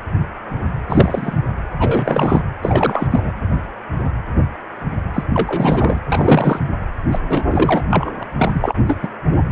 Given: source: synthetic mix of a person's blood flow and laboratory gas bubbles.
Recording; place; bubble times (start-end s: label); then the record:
Doppler ultrasound of blood flow; precordium
0.89-1.40 s: bubbles
1.76-2.44 s: bubbles
2.62-3.07 s: bubbles
3.10-3.32 s: bubbles
5.13-5.24 s: bubbles
5.33-5.98 s: bubbles
6.09-6.59 s: bubbles
7.12-7.19 s: bubbles
7.28-7.44 s: bubbles
7.48-7.82 s: bubbles
7.89-8.11 s: bubbles
8.20-8.23 s: bubbles
8.38-8.75 s: bubbles
8.87-8.97 s: bubbles
9.02-9.08 s: bubbles
From the record:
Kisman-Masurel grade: 333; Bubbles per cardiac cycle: rolling drumbeat, 9 or more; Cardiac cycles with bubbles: 50 to 99%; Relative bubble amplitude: loud (0.450 to 0.775); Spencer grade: 3 (all of the cardiac periods contain showers or single bubble signals, but not dominating or overriding the cardiac motion signals); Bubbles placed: anywhere in the cardiac cycle